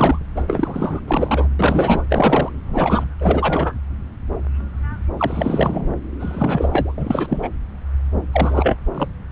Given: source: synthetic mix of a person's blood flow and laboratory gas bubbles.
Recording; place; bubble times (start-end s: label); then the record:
Doppler ultrasound of blood flow; subclavian vein
0.00-0.19 s: bubbles
0.36-0.43 s: bubbles
0.47-1.00 s: bubbles
1.08-1.49 s: bubbles
1.59-2.03 s: bubbles
2.09-2.50 s: bubbles
2.65-3.04 s: bubbles
3.21-3.75 s: bubbles
5.17-5.96 s: bubbles
6.20-6.94 s: bubbles
6.97-7.50 s: bubbles
8.32-8.77 s: bubbles
8.94-9.07 s: bubbles
From the record:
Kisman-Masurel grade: 333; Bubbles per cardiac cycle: rolling drumbeat, 9 or more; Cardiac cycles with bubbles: 50 to 99%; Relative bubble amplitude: loud (0.450 to 0.775); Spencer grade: 3 (all of the cardiac periods contain showers or single bubble signals, but not dominating or overriding the cardiac motion signals); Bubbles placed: anywhere in the cardiac cycle